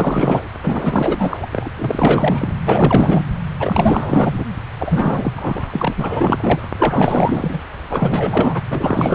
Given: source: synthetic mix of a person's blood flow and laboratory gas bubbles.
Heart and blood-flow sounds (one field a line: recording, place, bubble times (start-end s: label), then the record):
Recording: Doppler ultrasound of blood flow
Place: subclavian vein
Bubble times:
0.00-0.42 s: bubbles
0.63-1.37 s: bubbles
1.41-1.47 s: bubbles
1.52-1.68 s: bubbles
1.76-2.54 s: bubbles
2.67-3.23 s: bubbles
3.59-4.45 s: bubbles
4.77-5.93 s: bubbles
5.96-6.68 s: bubbles
6.77-7.60 s: bubbles
7.91-8.63 s: bubbles
8.70-9.15 s: bubbles
From the record:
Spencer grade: 4 (maximum detectable bubble signal sounding continuously throughout systole and diastole of every cardiac period, and overriding the amplitude of the normal cardiac signals)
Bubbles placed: anywhere in the cardiac cycle